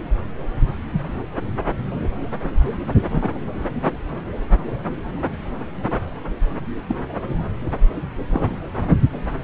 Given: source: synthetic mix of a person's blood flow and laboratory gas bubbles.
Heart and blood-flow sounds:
Doppler ultrasound of blood flow; subclavian vein
3.11-3.30 s: bubbles
6.87-6.96 s: bubbles
8.30-8.56 s: bubbles
From the record:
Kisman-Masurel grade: 122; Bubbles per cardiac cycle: 1 to 2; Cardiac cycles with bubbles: 10 to 50%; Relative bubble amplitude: moderate (0.250 to 0.450); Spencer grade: 2 (many but less than half of the cardiac periods contain bubble signals, singularly or in groups); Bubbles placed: anywhere in the cardiac cycle

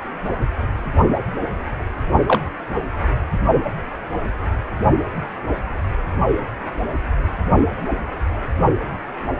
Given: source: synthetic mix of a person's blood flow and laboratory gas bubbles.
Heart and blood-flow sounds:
Doppler ultrasound of blood flow; precordium
2.27-2.43 s: bubbles
From the record:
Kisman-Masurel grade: 113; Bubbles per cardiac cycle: 1 to 2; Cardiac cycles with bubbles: 1 to 10%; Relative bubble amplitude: loud (0.450 to 0.775); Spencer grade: 1 (occasional bubble signal discernible with the cardiac motion signal, with majority of cardiac periods free of bubbles); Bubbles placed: only in the low amplitude regions of the cardiac cycle

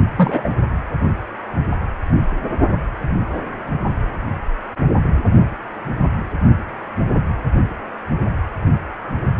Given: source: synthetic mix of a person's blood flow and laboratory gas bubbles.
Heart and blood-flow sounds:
Doppler ultrasound of blood flow; precordium
0.17-0.49 s: bubbles
From the record:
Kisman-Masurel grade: 213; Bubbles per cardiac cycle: several, 3 to 8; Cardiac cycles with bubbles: 1 to 10%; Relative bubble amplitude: loud (0.450 to 0.775); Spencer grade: 1 (occasional bubble signal discernible with the cardiac motion signal, with majority of cardiac periods free of bubbles); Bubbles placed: only in the low amplitude regions of the cardiac cycle

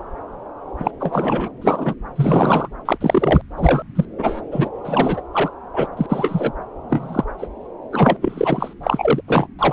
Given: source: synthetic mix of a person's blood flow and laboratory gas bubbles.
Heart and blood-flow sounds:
Doppler ultrasound of blood flow; subclavian vein
0.80-0.91 s: bubbles
1.00-1.48 s: bubbles
1.61-1.94 s: bubbles
2.15-2.68 s: bubbles
2.85-2.98 s: bubbles
3.00-3.42 s: bubbles
3.57-3.82 s: bubbles
3.95-4.05 s: bubbles
4.18-4.41 s: bubbles
4.51-4.69 s: bubbles
4.84-5.21 s: bubbles
5.33-5.50 s: bubbles
5.73-5.87 s: bubbles
5.97-6.06 s: bubbles
6.09-6.52 s: bubbles
6.89-7.24 s: bubbles
7.38-7.47 s: bubbles
7.93-8.19 s: bubbles
8.21-8.73 s: bubbles
8.83-9.21 s: bubbles
9.27-9.47 s: bubbles
9.58-9.73 s: bubbles
From the record:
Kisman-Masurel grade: 233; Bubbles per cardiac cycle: several, 3 to 8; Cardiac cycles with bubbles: 50 to 99%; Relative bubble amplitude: loud (0.450 to 0.775); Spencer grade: 3 (all of the cardiac periods contain showers or single bubble signals, but not dominating or overriding the cardiac motion signals); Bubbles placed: anywhere in the cardiac cycle

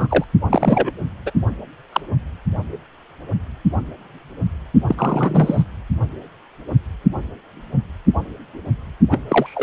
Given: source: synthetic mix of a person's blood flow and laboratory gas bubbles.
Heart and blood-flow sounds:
Doppler ultrasound of blood flow; precordium
0.00-0.24 s: bubbles
0.49-0.91 s: bubbles
1.26-1.31 s: bubbles
1.92-2.00 s: bubbles
4.88-4.95 s: bubbles
4.97-5.63 s: bubbles
9.10-9.18 s: bubbles
9.28-9.63 s: bubbles
From the record:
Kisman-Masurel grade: 233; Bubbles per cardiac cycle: several, 3 to 8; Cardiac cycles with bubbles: 50 to 99%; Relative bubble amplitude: loud (0.450 to 0.775); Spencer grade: 3 (all of the cardiac periods contain showers or single bubble signals, but not dominating or overriding the cardiac motion signals); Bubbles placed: only in the low amplitude regions of the cardiac cycle

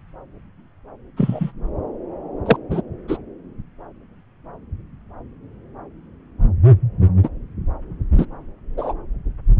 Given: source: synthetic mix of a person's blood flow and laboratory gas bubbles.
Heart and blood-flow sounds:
Doppler ultrasound of blood flow; subclavian vein
1.17-1.52 s: bubbles
2.46-2.56 s: bubbles
2.70-2.82 s: bubbles
3.08-3.18 s: bubbles
7.23-7.29 s: bubbles
8.17-8.26 s: bubbles
8.77-8.94 s: bubbles
From the record:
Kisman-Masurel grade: 123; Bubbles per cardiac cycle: 1 to 2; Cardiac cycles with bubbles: 10 to 50%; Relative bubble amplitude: loud (0.450 to 0.775); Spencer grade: 2 (many but less than half of the cardiac periods contain bubble signals, singularly or in groups); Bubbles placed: anywhere in the cardiac cycle

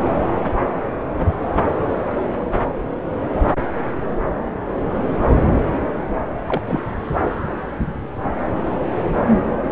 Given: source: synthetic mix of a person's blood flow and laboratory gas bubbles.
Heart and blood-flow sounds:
Doppler ultrasound of blood flow; subclavian vein
6.46-6.62 s: bubbles
6.67-6.80 s: bubbles
From the record:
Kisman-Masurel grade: 112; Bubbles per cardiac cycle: 1 to 2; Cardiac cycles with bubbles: 1 to 10%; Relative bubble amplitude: moderate (0.250 to 0.450); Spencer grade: 1 (occasional bubble signal discernible with the cardiac motion signal, with majority of cardiac periods free of bubbles); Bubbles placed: anywhere in the cardiac cycle

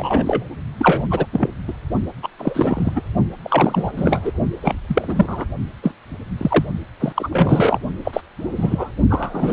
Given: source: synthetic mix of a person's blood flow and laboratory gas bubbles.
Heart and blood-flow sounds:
Doppler ultrasound of blood flow; precordium
0.00-0.45 s: bubbles
0.79-1.06 s: bubbles
1.10-1.26 s: bubbles
1.33-1.48 s: bubbles
1.67-1.73 s: bubbles
2.22-2.28 s: bubbles
2.38-2.92 s: bubbles
2.96-3.00 s: bubbles
3.43-3.91 s: bubbles
3.97-4.20 s: bubbles
4.25-4.32 s: bubbles
4.62-4.78 s: bubbles
4.87-5.45 s: bubbles
5.83-5.94 s: bubbles
6.38-6.65 s: bubbles
7.00-7.12 s: bubbles
7.16-7.79 s: bubbles
8.04-8.21 s: bubbles
8.38-8.93 s: bubbles
9.10-9.53 s: bubbles
From the record:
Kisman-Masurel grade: 233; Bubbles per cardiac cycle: several, 3 to 8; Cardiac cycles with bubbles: 50 to 99%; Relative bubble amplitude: loud (0.450 to 0.775); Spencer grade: 3 (all of the cardiac periods contain showers or single bubble signals, but not dominating or overriding the cardiac motion signals); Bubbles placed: only in the low amplitude regions of the cardiac cycle

